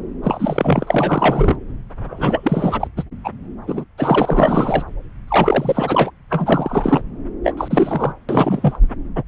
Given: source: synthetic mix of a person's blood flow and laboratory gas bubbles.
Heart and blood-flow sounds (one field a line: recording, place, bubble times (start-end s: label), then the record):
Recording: Doppler ultrasound of blood flow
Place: subclavian vein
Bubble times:
0.23-1.55 s: bubbles
2.08-2.88 s: bubbles
2.97-3.03 s: bubbles
3.24-3.30 s: bubbles
3.67-3.84 s: bubbles
3.98-4.83 s: bubbles
5.27-6.11 s: bubbles
6.30-7.02 s: bubbles
7.44-7.54 s: bubbles
7.57-8.13 s: bubbles
8.29-8.77 s: bubbles
9.15-9.23 s: bubbles
From the record:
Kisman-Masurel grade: 343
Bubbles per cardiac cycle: rolling drumbeat, 9 or more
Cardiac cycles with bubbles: 100%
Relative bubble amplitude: loud (0.450 to 0.775)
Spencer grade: 3 (all of the cardiac periods contain showers or single bubble signals, but not dominating or overriding the cardiac motion signals)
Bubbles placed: anywhere in the cardiac cycle